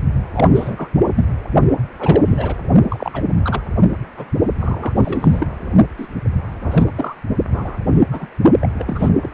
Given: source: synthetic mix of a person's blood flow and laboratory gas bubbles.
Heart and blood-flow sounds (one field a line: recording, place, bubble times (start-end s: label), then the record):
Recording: Doppler ultrasound of blood flow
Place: precordium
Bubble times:
0.33-0.46 s: bubbles
0.49-0.91 s: bubbles
1.15-1.26 s: bubbles
1.99-2.55 s: bubbles
2.88-3.11 s: bubbles
3.13-3.22 s: bubbles
3.42-3.61 s: bubbles
4.17-4.26 s: bubbles
4.59-5.47 s: bubbles
5.97-6.08 s: bubbles
6.63-6.92 s: bubbles
6.95-7.15 s: bubbles
7.52-7.78 s: bubbles
7.94-8.04 s: bubbles
8.11-8.28 s: bubbles
8.60-8.70 s: bubbles
8.78-9.09 s: bubbles
9.21-9.30 s: bubbles
From the record:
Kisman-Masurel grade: 243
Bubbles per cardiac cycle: several, 3 to 8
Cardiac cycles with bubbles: 100%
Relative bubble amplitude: loud (0.450 to 0.775)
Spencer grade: 3 (all of the cardiac periods contain showers or single bubble signals, but not dominating or overriding the cardiac motion signals)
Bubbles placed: only in the low amplitude regions of the cardiac cycle